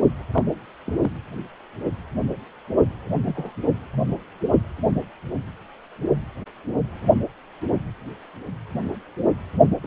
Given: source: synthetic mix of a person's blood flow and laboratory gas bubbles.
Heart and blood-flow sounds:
Doppler ultrasound of blood flow; precordium
0.33-0.44 s: bubbles
0.84-1.12 s: bubbles
3.26-3.54 s: bubbles
9.83-9.87 s: bubbles
From the record:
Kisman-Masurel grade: 121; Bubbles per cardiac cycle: 1 to 2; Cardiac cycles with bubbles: 10 to 50%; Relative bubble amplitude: barely perceptible (0.100 to 0.250); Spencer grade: 2 (many but less than half of the cardiac periods contain bubble signals, singularly or in groups); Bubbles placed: anywhere in the cardiac cycle

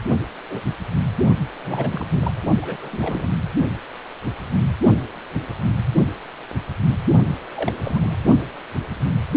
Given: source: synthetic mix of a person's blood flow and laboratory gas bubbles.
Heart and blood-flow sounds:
Doppler ultrasound of blood flow; precordium
0.49-0.60 s: bubbles
1.64-2.07 s: bubbles
2.12-2.33 s: bubbles
2.62-3.30 s: bubbles
7.55-7.75 s: bubbles
7.83-8.16 s: bubbles
From the record:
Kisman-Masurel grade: 222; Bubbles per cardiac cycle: several, 3 to 8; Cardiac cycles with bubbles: 10 to 50%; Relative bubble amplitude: moderate (0.250 to 0.450); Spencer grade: 2 (many but less than half of the cardiac periods contain bubble signals, singularly or in groups); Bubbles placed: only in the low amplitude regions of the cardiac cycle

